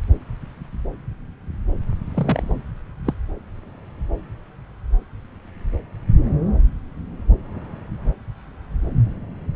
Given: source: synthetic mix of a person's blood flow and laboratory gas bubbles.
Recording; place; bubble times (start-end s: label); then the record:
Doppler ultrasound of blood flow; subclavian vein
2.14-2.61 s: bubbles
3.05-3.14 s: bubbles
From the record:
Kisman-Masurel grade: 112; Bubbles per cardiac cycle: 1 to 2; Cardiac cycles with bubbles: 1 to 10%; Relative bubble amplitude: moderate (0.250 to 0.450); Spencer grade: 1 (occasional bubble signal discernible with the cardiac motion signal, with majority of cardiac periods free of bubbles); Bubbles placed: anywhere in the cardiac cycle